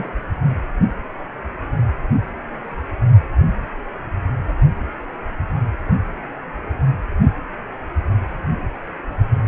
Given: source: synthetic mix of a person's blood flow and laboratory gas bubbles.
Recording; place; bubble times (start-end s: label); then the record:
Doppler ultrasound of blood flow; precordium
0.00-0.09 s: bubbles
From the record:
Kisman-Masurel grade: 122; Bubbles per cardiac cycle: 1 to 2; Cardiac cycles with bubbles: 10 to 50%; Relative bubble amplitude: moderate (0.250 to 0.450); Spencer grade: 2 (many but less than half of the cardiac periods contain bubble signals, singularly or in groups); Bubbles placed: anywhere in the cardiac cycle